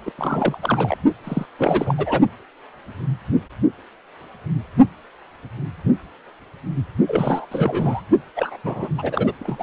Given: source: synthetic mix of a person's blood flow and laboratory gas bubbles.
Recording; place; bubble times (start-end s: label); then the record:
Doppler ultrasound of blood flow; precordium
0.05-0.12 s: bubbles
0.18-0.58 s: bubbles
0.62-0.98 s: bubbles
1.24-1.46 s: bubbles
1.58-1.94 s: bubbles
1.98-2.21 s: bubbles
7.07-7.46 s: bubbles
7.51-8.02 s: bubbles
8.36-8.57 s: bubbles
8.63-8.89 s: bubbles
8.98-9.33 s: bubbles
9.39-9.63 s: bubbles
From the record:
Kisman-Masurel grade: 332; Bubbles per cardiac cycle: rolling drumbeat, 9 or more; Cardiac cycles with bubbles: 50 to 99%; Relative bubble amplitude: moderate (0.250 to 0.450); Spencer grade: 3 (all of the cardiac periods contain showers or single bubble signals, but not dominating or overriding the cardiac motion signals); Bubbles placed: only in the low amplitude regions of the cardiac cycle